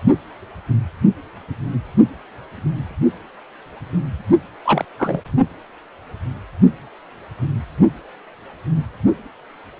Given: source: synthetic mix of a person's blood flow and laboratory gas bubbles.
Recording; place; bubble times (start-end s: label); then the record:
Doppler ultrasound of blood flow; precordium
4.65-4.85 s: bubbles
4.98-5.21 s: bubbles
From the record:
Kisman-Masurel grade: 213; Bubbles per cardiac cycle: several, 3 to 8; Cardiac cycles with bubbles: 1 to 10%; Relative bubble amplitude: loud (0.450 to 0.775); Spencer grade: 1 (occasional bubble signal discernible with the cardiac motion signal, with majority of cardiac periods free of bubbles); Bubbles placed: only in the low amplitude regions of the cardiac cycle